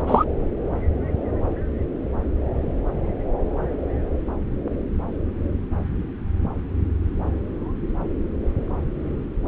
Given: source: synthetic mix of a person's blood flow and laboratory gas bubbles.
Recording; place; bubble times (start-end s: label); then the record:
Doppler ultrasound of blood flow; subclavian vein
0.07-0.24 s: bubbles
From the record:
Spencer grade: 1 (occasional bubble signal discernible with the cardiac motion signal, with majority of cardiac periods free of bubbles); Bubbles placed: anywhere in the cardiac cycle